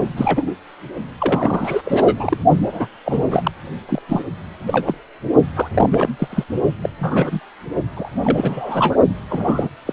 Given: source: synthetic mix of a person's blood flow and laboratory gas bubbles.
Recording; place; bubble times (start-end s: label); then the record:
Doppler ultrasound of blood flow; precordium
0.17-0.54 s: bubbles
1.20-1.81 s: bubbles
1.84-2.38 s: bubbles
2.56-2.88 s: bubbles
3.05-3.51 s: bubbles
3.88-4.02 s: bubbles
4.08-4.25 s: bubbles
4.67-4.95 s: bubbles
5.56-5.71 s: bubbles
5.74-6.16 s: bubbles
6.19-6.44 s: bubbles
6.82-6.90 s: bubbles
6.99-7.40 s: bubbles
7.96-8.09 s: bubbles
8.22-8.96 s: bubbles
9.29-9.68 s: bubbles
9.85-9.93 s: bubbles
From the record:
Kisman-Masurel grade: 242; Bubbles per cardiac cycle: several, 3 to 8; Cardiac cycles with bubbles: 100%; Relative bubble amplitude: moderate (0.250 to 0.450); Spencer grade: 3 (all of the cardiac periods contain showers or single bubble signals, but not dominating or overriding the cardiac motion signals); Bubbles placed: only in the low amplitude regions of the cardiac cycle